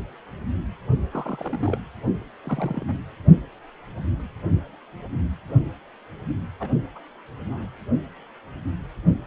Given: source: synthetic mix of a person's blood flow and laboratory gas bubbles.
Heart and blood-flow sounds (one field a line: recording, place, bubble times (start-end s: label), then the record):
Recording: Doppler ultrasound of blood flow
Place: precordium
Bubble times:
1.10-1.78 s: bubbles
2.45-2.95 s: bubbles
6.59-6.70 s: bubbles
6.96-6.99 s: bubbles
7.46-7.67 s: bubbles
From the record:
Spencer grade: 2 (many but less than half of the cardiac periods contain bubble signals, singularly or in groups)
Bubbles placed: anywhere in the cardiac cycle